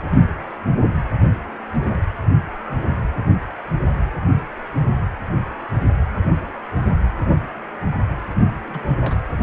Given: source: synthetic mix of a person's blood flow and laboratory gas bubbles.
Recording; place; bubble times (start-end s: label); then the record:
Doppler ultrasound of blood flow; precordium
8.66-8.92 s: bubbles
9.00-9.17 s: bubbles
From the record:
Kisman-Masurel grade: 211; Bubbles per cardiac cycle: several, 3 to 8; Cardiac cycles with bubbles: 1 to 10%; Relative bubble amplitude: barely perceptible (0.100 to 0.250); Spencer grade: 1 (occasional bubble signal discernible with the cardiac motion signal, with majority of cardiac periods free of bubbles); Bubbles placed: anywhere in the cardiac cycle